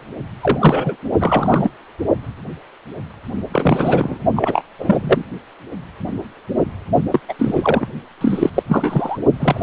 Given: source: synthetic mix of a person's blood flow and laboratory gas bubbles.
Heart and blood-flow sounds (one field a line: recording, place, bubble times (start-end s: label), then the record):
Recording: Doppler ultrasound of blood flow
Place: precordium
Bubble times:
0.41-0.96 s: bubbles
1.19-1.71 s: bubbles
3.52-4.18 s: bubbles
4.36-4.61 s: bubbles
4.78-5.00 s: bubbles
5.02-5.25 s: bubbles
7.11-7.20 s: bubbles
7.28-7.33 s: bubbles
7.38-7.88 s: bubbles
8.21-8.50 s: bubbles
8.54-8.63 s: bubbles
8.68-9.19 s: bubbles
9.40-9.63 s: bubbles
From the record:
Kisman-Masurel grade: 233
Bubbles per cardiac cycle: several, 3 to 8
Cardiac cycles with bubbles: 50 to 99%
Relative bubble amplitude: loud (0.450 to 0.775)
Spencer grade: 3 (all of the cardiac periods contain showers or single bubble signals, but not dominating or overriding the cardiac motion signals)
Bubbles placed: only in the low amplitude regions of the cardiac cycle